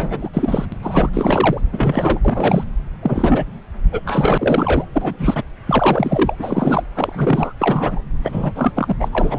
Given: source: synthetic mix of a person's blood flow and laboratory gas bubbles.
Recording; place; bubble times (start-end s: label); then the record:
Doppler ultrasound of blood flow; subclavian vein
0.00-0.29 s: bubbles
0.33-0.65 s: bubbles
0.72-0.77 s: bubbles
0.83-1.10 s: bubbles
1.13-1.61 s: bubbles
1.72-2.21 s: bubbles
2.25-2.65 s: bubbles
3.02-3.45 s: bubbles
3.92-4.00 s: bubbles
4.05-4.86 s: bubbles
4.93-5.17 s: bubbles
5.19-5.42 s: bubbles
5.67-6.35 s: bubbles
6.39-6.85 s: bubbles
6.96-7.53 s: bubbles
7.59-8.02 s: bubbles
8.24-8.52 s: bubbles
8.55-8.73 s: bubbles
8.76-8.95 s: bubbles
9.00-9.09 s: bubbles
9.12-9.39 s: bubbles
From the record:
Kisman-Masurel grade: 343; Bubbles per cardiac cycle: rolling drumbeat, 9 or more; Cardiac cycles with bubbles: 100%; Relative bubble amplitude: loud (0.450 to 0.775); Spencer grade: 3 (all of the cardiac periods contain showers or single bubble signals, but not dominating or overriding the cardiac motion signals); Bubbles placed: anywhere in the cardiac cycle